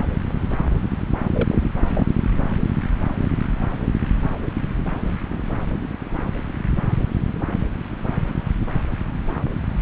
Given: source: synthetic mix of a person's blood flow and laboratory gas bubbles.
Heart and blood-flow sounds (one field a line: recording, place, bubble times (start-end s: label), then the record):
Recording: Doppler ultrasound of blood flow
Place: subclavian vein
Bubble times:
1.33-1.70 s: bubbles
1.90-2.05 s: bubbles
From the record:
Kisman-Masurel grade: 211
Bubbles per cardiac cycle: several, 3 to 8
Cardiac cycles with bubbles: 1 to 10%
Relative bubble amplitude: barely perceptible (0.100 to 0.250)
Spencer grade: 1 (occasional bubble signal discernible with the cardiac motion signal, with majority of cardiac periods free of bubbles)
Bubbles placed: anywhere in the cardiac cycle